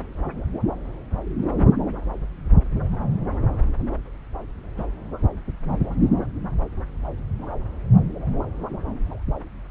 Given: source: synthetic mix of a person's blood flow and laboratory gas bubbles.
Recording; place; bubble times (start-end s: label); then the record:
Doppler ultrasound of blood flow; subclavian vein
4.77-4.86 s: bubbles
From the record:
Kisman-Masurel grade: 121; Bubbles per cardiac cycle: 1 to 2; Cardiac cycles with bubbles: 10 to 50%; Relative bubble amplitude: barely perceptible (0.100 to 0.250); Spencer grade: 2 (many but less than half of the cardiac periods contain bubble signals, singularly or in groups); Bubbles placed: anywhere in the cardiac cycle